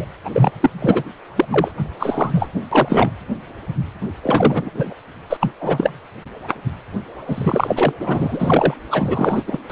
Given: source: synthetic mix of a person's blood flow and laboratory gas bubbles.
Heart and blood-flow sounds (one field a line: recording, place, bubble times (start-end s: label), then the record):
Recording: Doppler ultrasound of blood flow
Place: precordium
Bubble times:
0.00-0.04 s: bubbles
0.24-0.29 s: bubbles
0.33-0.51 s: bubbles
0.60-0.70 s: bubbles
0.81-1.03 s: bubbles
1.36-1.45 s: bubbles
1.51-1.72 s: bubbles
1.99-2.50 s: bubbles
2.71-3.10 s: bubbles
4.22-4.70 s: bubbles
4.73-4.93 s: bubbles
5.29-5.37 s: bubbles
5.40-5.51 s: bubbles
5.59-5.91 s: bubbles
7.26-7.92 s: bubbles
7.99-8.74 s: bubbles
8.91-9.44 s: bubbles
9.46-9.60 s: bubbles
9.70-9.72 s: bubbles
From the record:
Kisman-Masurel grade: 333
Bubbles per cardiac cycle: rolling drumbeat, 9 or more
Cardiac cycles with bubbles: 50 to 99%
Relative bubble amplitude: loud (0.450 to 0.775)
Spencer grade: 3 (all of the cardiac periods contain showers or single bubble signals, but not dominating or overriding the cardiac motion signals)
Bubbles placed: anywhere in the cardiac cycle